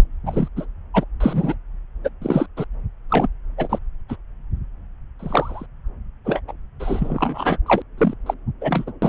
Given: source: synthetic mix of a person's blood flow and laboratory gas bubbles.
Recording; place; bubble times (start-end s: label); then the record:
Doppler ultrasound of blood flow; subclavian vein
0.00-0.02 s: bubbles
0.26-0.48 s: bubbles
0.56-0.65 s: bubbles
0.94-1.04 s: bubbles
1.20-1.55 s: bubbles
2.04-2.09 s: bubbles
2.21-2.46 s: bubbles
2.57-2.64 s: bubbles
3.09-3.28 s: bubbles
3.58-3.79 s: bubbles
4.08-4.16 s: bubbles
5.19-5.66 s: bubbles
6.25-6.41 s: bubbles
6.47-6.52 s: bubbles
6.79-7.57 s: bubbles
7.66-7.82 s: bubbles
7.97-8.13 s: bubbles
8.26-8.34 s: bubbles
8.61-8.90 s: bubbles
9.02-9.09 s: bubbles
From the record:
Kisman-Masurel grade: 242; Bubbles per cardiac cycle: several, 3 to 8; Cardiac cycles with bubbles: 100%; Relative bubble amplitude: moderate (0.250 to 0.450); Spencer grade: 3 (all of the cardiac periods contain showers or single bubble signals, but not dominating or overriding the cardiac motion signals); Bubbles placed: anywhere in the cardiac cycle